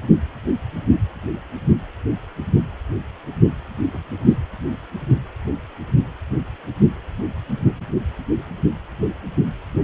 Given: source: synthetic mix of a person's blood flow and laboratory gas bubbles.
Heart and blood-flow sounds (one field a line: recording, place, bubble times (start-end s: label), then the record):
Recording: Doppler ultrasound of blood flow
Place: precordium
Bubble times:
3.94-3.98 s: bubbles
4.26-4.37 s: bubbles
From the record:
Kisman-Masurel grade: 111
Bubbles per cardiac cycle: 1 to 2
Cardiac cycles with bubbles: 1 to 10%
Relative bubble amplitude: barely perceptible (0.100 to 0.250)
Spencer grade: 1 (occasional bubble signal discernible with the cardiac motion signal, with majority of cardiac periods free of bubbles)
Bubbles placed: anywhere in the cardiac cycle